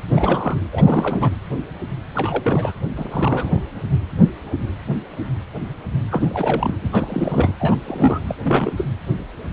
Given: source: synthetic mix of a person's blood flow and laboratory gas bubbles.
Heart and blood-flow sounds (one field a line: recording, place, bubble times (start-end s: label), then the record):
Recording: Doppler ultrasound of blood flow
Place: precordium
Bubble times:
0.08-0.57 s: bubbles
0.72-1.31 s: bubbles
2.15-2.72 s: bubbles
2.96-3.62 s: bubbles
6.11-6.75 s: bubbles
6.82-6.90 s: bubbles
6.92-7.54 s: bubbles
7.60-7.77 s: bubbles
7.87-8.19 s: bubbles
8.28-8.35 s: bubbles
8.44-8.72 s: bubbles
8.77-8.85 s: bubbles
From the record:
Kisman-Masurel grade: 332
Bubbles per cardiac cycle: rolling drumbeat, 9 or more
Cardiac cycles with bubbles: 50 to 99%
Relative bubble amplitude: moderate (0.250 to 0.450)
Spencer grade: 3 (all of the cardiac periods contain showers or single bubble signals, but not dominating or overriding the cardiac motion signals)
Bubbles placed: anywhere in the cardiac cycle